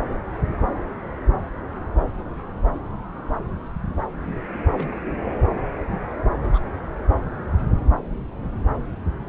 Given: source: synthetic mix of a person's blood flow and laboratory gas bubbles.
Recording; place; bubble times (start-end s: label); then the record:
Doppler ultrasound of blood flow; subclavian vein
4.74-4.88 s: bubbles
4.92-4.96 s: bubbles
6.37-6.59 s: bubbles
From the record:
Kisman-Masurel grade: 121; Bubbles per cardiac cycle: 1 to 2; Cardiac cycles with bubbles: 10 to 50%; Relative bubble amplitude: barely perceptible (0.100 to 0.250); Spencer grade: 2 (many but less than half of the cardiac periods contain bubble signals, singularly or in groups); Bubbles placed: anywhere in the cardiac cycle